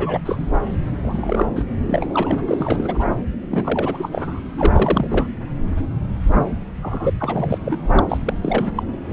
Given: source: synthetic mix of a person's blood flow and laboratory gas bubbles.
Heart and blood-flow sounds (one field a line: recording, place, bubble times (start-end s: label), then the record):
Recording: Doppler ultrasound of blood flow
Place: subclavian vein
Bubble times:
0.00-0.20 s: bubbles
0.26-0.51 s: bubbles
1.03-1.46 s: bubbles
1.56-1.64 s: bubbles
1.86-2.40 s: bubbles
2.48-3.04 s: bubbles
3.50-4.08 s: bubbles
4.11-4.39 s: bubbles
4.57-5.27 s: bubbles
6.82-7.13 s: bubbles
7.19-7.58 s: bubbles
7.63-7.76 s: bubbles
7.94-8.18 s: bubbles
8.25-8.34 s: bubbles
8.41-8.71 s: bubbles
8.76-8.83 s: bubbles
From the record:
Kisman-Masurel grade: 332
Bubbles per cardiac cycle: rolling drumbeat, 9 or more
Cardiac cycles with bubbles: 50 to 99%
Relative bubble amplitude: moderate (0.250 to 0.450)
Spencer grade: 3 (all of the cardiac periods contain showers or single bubble signals, but not dominating or overriding the cardiac motion signals)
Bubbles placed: anywhere in the cardiac cycle